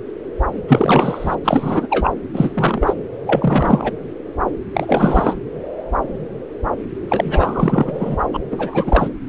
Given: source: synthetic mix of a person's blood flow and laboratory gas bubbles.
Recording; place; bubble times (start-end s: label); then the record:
Doppler ultrasound of blood flow; subclavian vein
0.68-1.35 s: bubbles
1.44-1.86 s: bubbles
1.90-2.11 s: bubbles
2.33-2.94 s: bubbles
3.26-3.92 s: bubbles
4.74-5.36 s: bubbles
7.08-8.17 s: bubbles
8.34-8.39 s: bubbles
8.51-9.09 s: bubbles
From the record:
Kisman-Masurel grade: 333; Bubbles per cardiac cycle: rolling drumbeat, 9 or more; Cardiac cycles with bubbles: 50 to 99%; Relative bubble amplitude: loud (0.450 to 0.775); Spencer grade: 3 (all of the cardiac periods contain showers or single bubble signals, but not dominating or overriding the cardiac motion signals); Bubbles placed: anywhere in the cardiac cycle